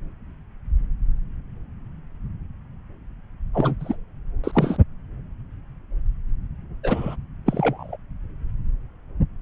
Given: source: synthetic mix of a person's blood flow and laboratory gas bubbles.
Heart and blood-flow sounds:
Doppler ultrasound of blood flow; subclavian vein
3.53-3.75 s: bubbles
3.80-3.96 s: bubbles
4.44-4.77 s: bubbles
6.83-7.15 s: bubbles
7.46-7.96 s: bubbles
From the record:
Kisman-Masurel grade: 222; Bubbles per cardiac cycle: several, 3 to 8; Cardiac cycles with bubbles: 10 to 50%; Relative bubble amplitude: moderate (0.250 to 0.450); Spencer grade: 2 (many but less than half of the cardiac periods contain bubble signals, singularly or in groups); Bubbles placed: anywhere in the cardiac cycle

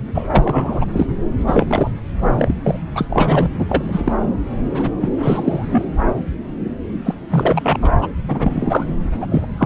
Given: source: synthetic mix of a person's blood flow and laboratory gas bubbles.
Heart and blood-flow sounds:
Doppler ultrasound of blood flow; subclavian vein
0.14-0.27 s: bubbles
0.30-0.85 s: bubbles
0.92-1.07 s: bubbles
1.47-1.91 s: bubbles
2.20-2.53 s: bubbles
2.62-2.79 s: bubbles
2.94-3.06 s: bubbles
3.10-3.50 s: bubbles
3.60-4.13 s: bubbles
4.71-4.90 s: bubbles
5.00-5.09 s: bubbles
5.22-5.85 s: bubbles
7.04-7.14 s: bubbles
7.31-7.78 s: bubbles
7.81-7.91 s: bubbles
7.98-8.09 s: bubbles
8.28-9.10 s: bubbles
9.20-9.27 s: bubbles
9.31-9.46 s: bubbles
9.58-9.66 s: bubbles
From the record:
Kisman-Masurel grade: 233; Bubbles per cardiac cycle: several, 3 to 8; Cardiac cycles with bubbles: 50 to 99%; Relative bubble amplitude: loud (0.450 to 0.775); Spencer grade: 3 (all of the cardiac periods contain showers or single bubble signals, but not dominating or overriding the cardiac motion signals); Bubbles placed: anywhere in the cardiac cycle

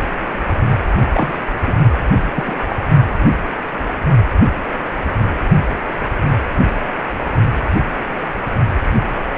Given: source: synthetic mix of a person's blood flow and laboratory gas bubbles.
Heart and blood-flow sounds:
Doppler ultrasound of blood flow; precordium
1.11-1.46 s: bubbles
1.61-1.74 s: bubbles
2.35-2.56 s: bubbles
2.70-2.75 s: bubbles
From the record:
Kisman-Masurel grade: 212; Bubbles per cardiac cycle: several, 3 to 8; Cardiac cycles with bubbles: 1 to 10%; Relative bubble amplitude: moderate (0.250 to 0.450); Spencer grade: 1 (occasional bubble signal discernible with the cardiac motion signal, with majority of cardiac periods free of bubbles); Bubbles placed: only in the low amplitude regions of the cardiac cycle

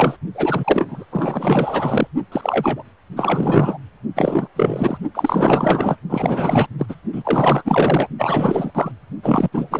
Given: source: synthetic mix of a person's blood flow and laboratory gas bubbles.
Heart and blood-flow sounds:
Doppler ultrasound of blood flow; precordium
0.00-0.17 s: bubbles
0.34-1.05 s: bubbles
1.12-2.08 s: bubbles
2.31-2.83 s: bubbles
3.16-3.78 s: bubbles
4.16-4.48 s: bubbles
4.55-4.98 s: bubbles
5.15-5.96 s: bubbles
6.09-6.67 s: bubbles
6.78-6.86 s: bubbles
6.88-6.95 s: bubbles
7.12-7.62 s: bubbles
7.65-8.08 s: bubbles
8.18-8.71 s: bubbles
8.75-8.92 s: bubbles
9.23-9.48 s: bubbles
9.52-9.80 s: bubbles
From the record:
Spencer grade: 4 (maximum detectable bubble signal sounding continuously throughout systole and diastole of every cardiac period, and overriding the amplitude of the normal cardiac signals); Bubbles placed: only in the low amplitude regions of the cardiac cycle

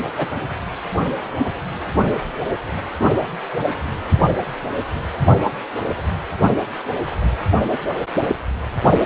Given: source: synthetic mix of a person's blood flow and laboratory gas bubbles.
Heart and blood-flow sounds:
Doppler ultrasound of blood flow; precordium
0.16-0.28 s: bubbles
From the record:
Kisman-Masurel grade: 122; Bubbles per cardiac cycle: 1 to 2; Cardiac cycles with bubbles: 10 to 50%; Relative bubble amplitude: moderate (0.250 to 0.450); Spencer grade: 2 (many but less than half of the cardiac periods contain bubble signals, singularly or in groups); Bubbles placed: only in the low amplitude regions of the cardiac cycle

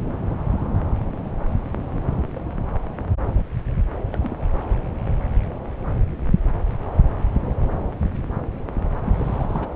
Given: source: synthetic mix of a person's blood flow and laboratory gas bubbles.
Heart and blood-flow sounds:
Doppler ultrasound of blood flow; subclavian vein
4.12-4.40 s: bubbles
9.06-9.68 s: bubbles
From the record:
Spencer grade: 1 (occasional bubble signal discernible with the cardiac motion signal, with majority of cardiac periods free of bubbles); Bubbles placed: anywhere in the cardiac cycle

